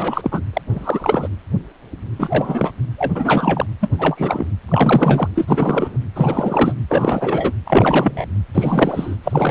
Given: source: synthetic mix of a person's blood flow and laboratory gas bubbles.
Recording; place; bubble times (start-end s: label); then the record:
Doppler ultrasound of blood flow; precordium
0.00-0.41 s: bubbles
0.53-0.61 s: bubbles
0.70-1.29 s: bubbles
2.19-2.71 s: bubbles
2.98-3.66 s: bubbles
3.81-3.89 s: bubbles
3.92-4.47 s: bubbles
4.68-5.28 s: bubbles
5.35-5.97 s: bubbles
6.15-6.73 s: bubbles
6.88-7.52 s: bubbles
7.65-8.26 s: bubbles
8.54-9.16 s: bubbles
9.24-9.51 s: bubbles
From the record:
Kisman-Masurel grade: 333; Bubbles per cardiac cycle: rolling drumbeat, 9 or more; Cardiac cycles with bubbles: 50 to 99%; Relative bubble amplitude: loud (0.450 to 0.775); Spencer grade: 3 (all of the cardiac periods contain showers or single bubble signals, but not dominating or overriding the cardiac motion signals); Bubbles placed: anywhere in the cardiac cycle